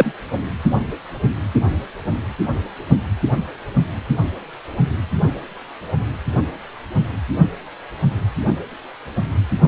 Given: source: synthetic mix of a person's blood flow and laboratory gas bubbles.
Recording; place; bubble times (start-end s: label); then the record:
Doppler ultrasound of blood flow; precordium
0.00-0.12 s: bubbles
From the record:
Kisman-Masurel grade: 113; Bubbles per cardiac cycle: 1 to 2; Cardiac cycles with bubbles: 1 to 10%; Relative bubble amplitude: loud (0.450 to 0.775); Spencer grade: 1 (occasional bubble signal discernible with the cardiac motion signal, with majority of cardiac periods free of bubbles); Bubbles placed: only in the low amplitude regions of the cardiac cycle